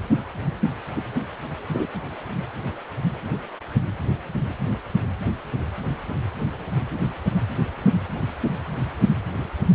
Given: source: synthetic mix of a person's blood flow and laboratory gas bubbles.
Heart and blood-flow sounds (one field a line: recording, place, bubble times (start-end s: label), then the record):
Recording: Doppler ultrasound of blood flow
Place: precordium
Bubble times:
0.95-1.01 s: bubbles
1.72-1.89 s: bubbles
From the record:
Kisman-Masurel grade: 112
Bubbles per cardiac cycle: 1 to 2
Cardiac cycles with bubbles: 1 to 10%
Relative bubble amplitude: moderate (0.250 to 0.450)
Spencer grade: 1 (occasional bubble signal discernible with the cardiac motion signal, with majority of cardiac periods free of bubbles)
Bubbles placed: only in the low amplitude regions of the cardiac cycle